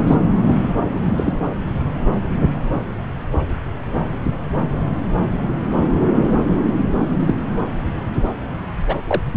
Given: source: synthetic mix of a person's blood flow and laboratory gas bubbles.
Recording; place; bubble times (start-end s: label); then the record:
Doppler ultrasound of blood flow; subclavian vein
0.07-0.15 s: bubbles
1.17-1.33 s: bubbles
7.20-7.34 s: bubbles
8.87-8.98 s: bubbles
9.08-9.21 s: bubbles
From the record:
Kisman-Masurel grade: 123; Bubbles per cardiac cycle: 1 to 2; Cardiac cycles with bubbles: 10 to 50%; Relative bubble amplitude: loud (0.450 to 0.775); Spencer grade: 2 (many but less than half of the cardiac periods contain bubble signals, singularly or in groups); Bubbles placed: anywhere in the cardiac cycle